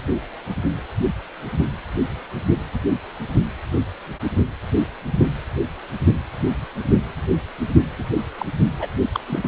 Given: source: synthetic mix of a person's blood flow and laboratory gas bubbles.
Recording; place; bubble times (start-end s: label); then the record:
Doppler ultrasound of blood flow; precordium
7.98-8.04 s: bubbles
8.38-8.46 s: bubbles
8.78-8.88 s: bubbles
9.13-9.19 s: bubbles
9.26-9.39 s: bubbles
9.42-9.48 s: bubbles
From the record:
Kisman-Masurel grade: 222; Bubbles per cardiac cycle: several, 3 to 8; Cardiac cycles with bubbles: 10 to 50%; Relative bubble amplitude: moderate (0.250 to 0.450); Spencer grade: 2 (many but less than half of the cardiac periods contain bubble signals, singularly or in groups); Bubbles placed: only in the low amplitude regions of the cardiac cycle